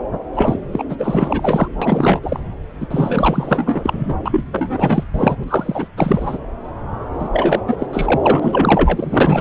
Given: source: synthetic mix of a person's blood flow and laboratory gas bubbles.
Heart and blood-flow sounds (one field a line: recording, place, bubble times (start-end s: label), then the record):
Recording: Doppler ultrasound of blood flow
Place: subclavian vein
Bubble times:
0.35-0.59 s: bubbles
0.71-0.84 s: bubbles
0.89-1.69 s: bubbles
1.81-2.40 s: bubbles
2.80-2.88 s: bubbles
2.91-4.15 s: bubbles
4.25-4.44 s: bubbles
4.51-5.04 s: bubbles
5.14-5.44 s: bubbles
5.48-5.88 s: bubbles
5.97-6.38 s: bubbles
7.19-7.29 s: bubbles
7.33-7.61 s: bubbles
7.67-7.86 s: bubbles
7.92-9.41 s: bubbles
From the record:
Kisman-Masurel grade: 444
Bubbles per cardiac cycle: continuous sound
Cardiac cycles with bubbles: 100%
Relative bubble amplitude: maximal (0.775 to 0.999)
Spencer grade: 4 (maximum detectable bubble signal sounding continuously throughout systole and diastole of every cardiac period, and overriding the amplitude of the normal cardiac signals)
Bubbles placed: anywhere in the cardiac cycle